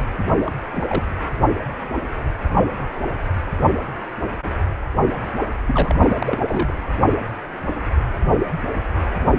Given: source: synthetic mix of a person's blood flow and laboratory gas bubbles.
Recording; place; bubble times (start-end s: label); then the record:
Doppler ultrasound of blood flow; precordium
0.47-0.51 s: bubbles
0.71-0.83 s: bubbles
0.88-1.03 s: bubbles
5.67-6.39 s: bubbles
6.47-6.74 s: bubbles
From the record:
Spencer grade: 2 (many but less than half of the cardiac periods contain bubble signals, singularly or in groups); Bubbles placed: only in the low amplitude regions of the cardiac cycle